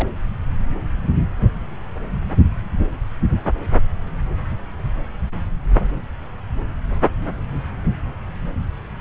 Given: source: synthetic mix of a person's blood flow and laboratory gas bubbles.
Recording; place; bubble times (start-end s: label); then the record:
Doppler ultrasound of blood flow; subclavian vein
0.00-0.09 s: bubbles
From the record:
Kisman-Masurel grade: 211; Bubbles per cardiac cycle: several, 3 to 8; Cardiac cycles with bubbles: 1 to 10%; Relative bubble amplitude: barely perceptible (0.100 to 0.250); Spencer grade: 1 (occasional bubble signal discernible with the cardiac motion signal, with majority of cardiac periods free of bubbles); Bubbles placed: anywhere in the cardiac cycle